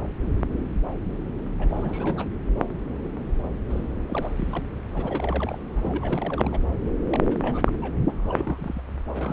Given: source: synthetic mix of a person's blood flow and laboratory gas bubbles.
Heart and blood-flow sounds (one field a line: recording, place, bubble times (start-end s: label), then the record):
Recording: Doppler ultrasound of blood flow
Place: subclavian vein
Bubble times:
1.59-2.27 s: bubbles
3.68-3.86 s: bubbles
4.08-4.65 s: bubbles
4.90-5.58 s: bubbles
5.75-6.60 s: bubbles
7.09-7.27 s: bubbles
7.30-7.73 s: bubbles
7.81-7.97 s: bubbles
8.10-8.81 s: bubbles
9.05-9.33 s: bubbles
From the record:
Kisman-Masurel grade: 332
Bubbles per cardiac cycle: rolling drumbeat, 9 or more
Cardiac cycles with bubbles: 50 to 99%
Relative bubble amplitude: moderate (0.250 to 0.450)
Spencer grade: 3 (all of the cardiac periods contain showers or single bubble signals, but not dominating or overriding the cardiac motion signals)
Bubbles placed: anywhere in the cardiac cycle